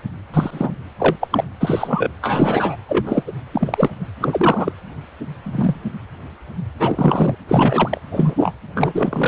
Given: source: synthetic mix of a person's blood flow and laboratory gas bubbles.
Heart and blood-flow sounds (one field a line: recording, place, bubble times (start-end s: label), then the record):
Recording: Doppler ultrasound of blood flow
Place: precordium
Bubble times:
0.33-0.79 s: bubbles
0.99-1.16 s: bubbles
1.20-1.27 s: bubbles
1.30-1.51 s: bubbles
1.60-2.11 s: bubbles
2.21-2.76 s: bubbles
2.88-3.23 s: bubbles
3.27-3.32 s: bubbles
3.51-3.90 s: bubbles
4.20-4.73 s: bubbles
5.43-5.83 s: bubbles
6.79-7.35 s: bubbles
7.48-8.00 s: bubbles
8.11-8.53 s: bubbles
8.74-9.28 s: bubbles
From the record:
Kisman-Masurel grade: 233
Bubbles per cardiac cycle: several, 3 to 8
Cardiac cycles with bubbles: 50 to 99%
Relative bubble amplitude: loud (0.450 to 0.775)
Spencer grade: 3 (all of the cardiac periods contain showers or single bubble signals, but not dominating or overriding the cardiac motion signals)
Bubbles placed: anywhere in the cardiac cycle